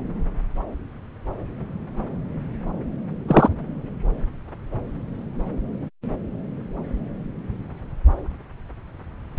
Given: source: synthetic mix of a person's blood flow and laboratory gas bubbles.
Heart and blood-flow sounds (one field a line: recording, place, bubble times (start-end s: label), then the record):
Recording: Doppler ultrasound of blood flow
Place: subclavian vein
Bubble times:
3.27-3.48 s: bubbles
From the record:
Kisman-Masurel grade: 113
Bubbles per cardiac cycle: 1 to 2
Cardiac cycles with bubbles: 1 to 10%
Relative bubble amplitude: loud (0.450 to 0.775)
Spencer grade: 1 (occasional bubble signal discernible with the cardiac motion signal, with majority of cardiac periods free of bubbles)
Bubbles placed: anywhere in the cardiac cycle